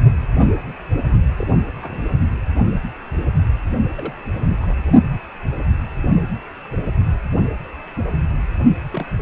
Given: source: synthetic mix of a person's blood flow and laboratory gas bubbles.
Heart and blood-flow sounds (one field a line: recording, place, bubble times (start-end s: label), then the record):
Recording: Doppler ultrasound of blood flow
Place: precordium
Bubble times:
1.07-1.14 s: bubbles
1.36-1.57 s: bubbles
1.82-2.04 s: bubbles
3.97-4.14 s: bubbles
4.34-4.56 s: bubbles
4.61-4.75 s: bubbles
8.92-9.13 s: bubbles
From the record:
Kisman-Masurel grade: 221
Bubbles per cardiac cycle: several, 3 to 8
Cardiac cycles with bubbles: 10 to 50%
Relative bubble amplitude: barely perceptible (0.100 to 0.250)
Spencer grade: 2 (many but less than half of the cardiac periods contain bubble signals, singularly or in groups)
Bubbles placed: only in the low amplitude regions of the cardiac cycle